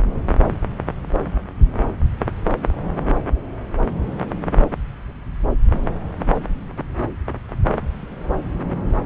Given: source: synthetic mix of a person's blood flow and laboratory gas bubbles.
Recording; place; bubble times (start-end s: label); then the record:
Doppler ultrasound of blood flow; subclavian vein
no bubbles
From the record:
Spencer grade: 0 (complete lack of bubble signals)